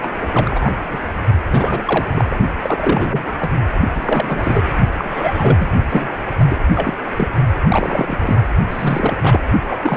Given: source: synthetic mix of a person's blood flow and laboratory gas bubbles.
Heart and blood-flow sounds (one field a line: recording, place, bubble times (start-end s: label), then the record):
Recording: Doppler ultrasound of blood flow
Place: precordium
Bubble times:
0.00-0.10 s: bubbles
0.23-0.71 s: bubbles
0.90-0.99 s: bubbles
1.49-2.05 s: bubbles
2.14-2.37 s: bubbles
2.62-3.33 s: bubbles
3.40-3.50 s: bubbles
3.94-4.63 s: bubbles
4.97-5.68 s: bubbles
5.88-6.17 s: bubbles
6.39-6.45 s: bubbles
6.48-6.58 s: bubbles
6.75-6.94 s: bubbles
7.17-7.28 s: bubbles
7.67-8.38 s: bubbles
8.70-9.15 s: bubbles
9.22-9.40 s: bubbles
9.66-9.78 s: bubbles
9.82-9.97 s: bubbles
From the record:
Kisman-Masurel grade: 342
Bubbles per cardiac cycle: rolling drumbeat, 9 or more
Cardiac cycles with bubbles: 100%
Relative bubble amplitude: moderate (0.250 to 0.450)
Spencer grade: 3 (all of the cardiac periods contain showers or single bubble signals, but not dominating or overriding the cardiac motion signals)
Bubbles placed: only in the low amplitude regions of the cardiac cycle